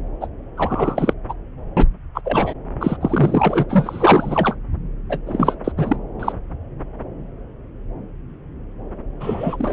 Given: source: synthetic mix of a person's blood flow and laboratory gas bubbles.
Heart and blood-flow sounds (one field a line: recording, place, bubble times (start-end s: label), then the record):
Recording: Doppler ultrasound of blood flow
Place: subclavian vein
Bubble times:
0.20-0.27 s: bubbles
0.57-1.14 s: bubbles
1.29-1.34 s: bubbles
1.77-1.87 s: bubbles
2.15-2.21 s: bubbles
2.25-2.54 s: bubbles
2.80-2.97 s: bubbles
3.00-3.65 s: bubbles
3.69-4.55 s: bubbles
5.09-5.19 s: bubbles
5.25-5.55 s: bubbles
5.64-5.72 s: bubbles
5.77-5.96 s: bubbles
6.20-6.33 s: bubbles
9.20-9.73 s: bubbles
From the record:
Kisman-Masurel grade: 333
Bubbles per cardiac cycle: rolling drumbeat, 9 or more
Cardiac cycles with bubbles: 50 to 99%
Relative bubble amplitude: loud (0.450 to 0.775)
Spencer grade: 3 (all of the cardiac periods contain showers or single bubble signals, but not dominating or overriding the cardiac motion signals)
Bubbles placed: anywhere in the cardiac cycle